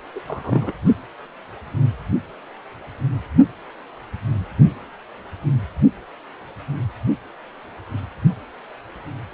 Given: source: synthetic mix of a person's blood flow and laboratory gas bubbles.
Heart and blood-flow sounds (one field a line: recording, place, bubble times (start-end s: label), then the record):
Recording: Doppler ultrasound of blood flow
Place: precordium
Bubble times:
0.15-0.20 s: bubbles
0.27-0.73 s: bubbles
0.85-0.94 s: bubbles
From the record:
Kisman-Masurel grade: 211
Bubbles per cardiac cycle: several, 3 to 8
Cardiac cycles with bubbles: 1 to 10%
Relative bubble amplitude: barely perceptible (0.100 to 0.250)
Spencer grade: 1 (occasional bubble signal discernible with the cardiac motion signal, with majority of cardiac periods free of bubbles)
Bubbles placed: anywhere in the cardiac cycle